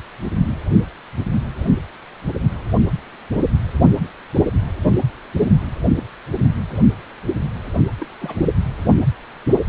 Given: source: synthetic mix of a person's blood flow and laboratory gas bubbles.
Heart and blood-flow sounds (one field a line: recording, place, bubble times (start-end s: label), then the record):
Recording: Doppler ultrasound of blood flow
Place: precordium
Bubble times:
8.00-8.06 s: bubbles
8.20-8.36 s: bubbles
From the record:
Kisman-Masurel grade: 211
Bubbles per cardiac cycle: several, 3 to 8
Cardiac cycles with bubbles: 1 to 10%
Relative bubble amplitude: barely perceptible (0.100 to 0.250)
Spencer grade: 1 (occasional bubble signal discernible with the cardiac motion signal, with majority of cardiac periods free of bubbles)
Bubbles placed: only in the low amplitude regions of the cardiac cycle